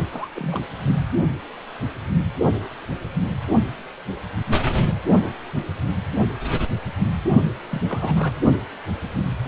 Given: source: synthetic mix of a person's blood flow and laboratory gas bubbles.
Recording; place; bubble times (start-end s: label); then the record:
Doppler ultrasound of blood flow; precordium
0.00-0.04 s: bubbles
0.10-0.29 s: bubbles
0.36-0.61 s: bubbles
7.72-7.81 s: bubbles
7.89-8.31 s: bubbles
From the record:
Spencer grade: 2 (many but less than half of the cardiac periods contain bubble signals, singularly or in groups); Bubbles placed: only in the low amplitude regions of the cardiac cycle